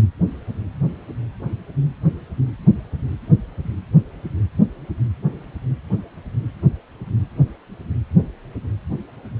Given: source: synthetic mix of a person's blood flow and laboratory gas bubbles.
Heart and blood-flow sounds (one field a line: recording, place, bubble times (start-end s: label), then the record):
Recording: Doppler ultrasound of blood flow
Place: precordium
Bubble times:
no bubbles
From the record:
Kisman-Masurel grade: 000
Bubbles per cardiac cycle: 0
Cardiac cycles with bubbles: 0%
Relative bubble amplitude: no bubbles discernible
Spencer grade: 0 (complete lack of bubble signals)